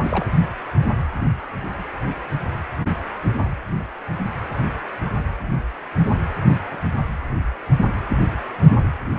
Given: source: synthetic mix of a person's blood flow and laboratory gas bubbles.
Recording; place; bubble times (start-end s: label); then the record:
Doppler ultrasound of blood flow; precordium
0.00-0.25 s: bubbles
From the record:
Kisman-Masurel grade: 211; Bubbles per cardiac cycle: several, 3 to 8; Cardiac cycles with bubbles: 1 to 10%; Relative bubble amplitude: barely perceptible (0.100 to 0.250); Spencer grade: 1 (occasional bubble signal discernible with the cardiac motion signal, with majority of cardiac periods free of bubbles); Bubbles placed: anywhere in the cardiac cycle